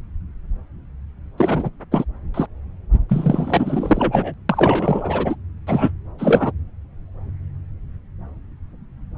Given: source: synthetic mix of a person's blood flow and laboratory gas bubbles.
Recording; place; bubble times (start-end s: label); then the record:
Doppler ultrasound of blood flow; subclavian vein
1.38-1.70 s: bubbles
1.92-2.04 s: bubbles
2.34-2.46 s: bubbles
3.09-4.34 s: bubbles
4.49-5.36 s: bubbles
5.67-5.91 s: bubbles
6.18-6.51 s: bubbles
From the record:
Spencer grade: 3 (all of the cardiac periods contain showers or single bubble signals, but not dominating or overriding the cardiac motion signals); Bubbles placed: anywhere in the cardiac cycle